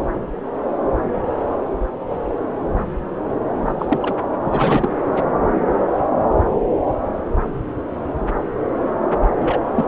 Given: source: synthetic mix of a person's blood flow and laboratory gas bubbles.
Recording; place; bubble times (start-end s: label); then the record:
Doppler ultrasound of blood flow; subclavian vein
3.65-3.73 s: bubbles
3.79-4.14 s: bubbles
4.42-4.88 s: bubbles
5.13-5.24 s: bubbles
9.39-9.61 s: bubbles
9.76-9.85 s: bubbles
From the record:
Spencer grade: 2 (many but less than half of the cardiac periods contain bubble signals, singularly or in groups); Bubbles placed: anywhere in the cardiac cycle